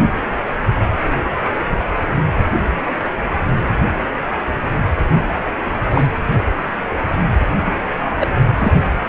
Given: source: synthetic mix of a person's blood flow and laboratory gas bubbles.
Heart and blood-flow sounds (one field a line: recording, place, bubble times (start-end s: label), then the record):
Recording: Doppler ultrasound of blood flow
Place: precordium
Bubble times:
5.12-5.26 s: bubbles
5.90-6.06 s: bubbles
8.20-8.27 s: bubbles
8.57-8.99 s: bubbles
From the record:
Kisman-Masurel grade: 123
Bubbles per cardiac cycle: 1 to 2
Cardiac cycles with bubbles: 10 to 50%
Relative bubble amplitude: loud (0.450 to 0.775)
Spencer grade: 2 (many but less than half of the cardiac periods contain bubble signals, singularly or in groups)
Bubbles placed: anywhere in the cardiac cycle